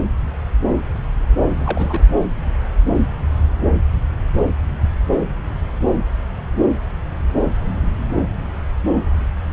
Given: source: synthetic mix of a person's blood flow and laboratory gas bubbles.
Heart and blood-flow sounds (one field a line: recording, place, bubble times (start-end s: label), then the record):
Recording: Doppler ultrasound of blood flow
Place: subclavian vein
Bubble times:
1.41-2.04 s: bubbles
From the record:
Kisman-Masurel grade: 222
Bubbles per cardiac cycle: several, 3 to 8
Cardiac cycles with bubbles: 10 to 50%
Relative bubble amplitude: moderate (0.250 to 0.450)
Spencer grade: 2 (many but less than half of the cardiac periods contain bubble signals, singularly or in groups)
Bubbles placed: anywhere in the cardiac cycle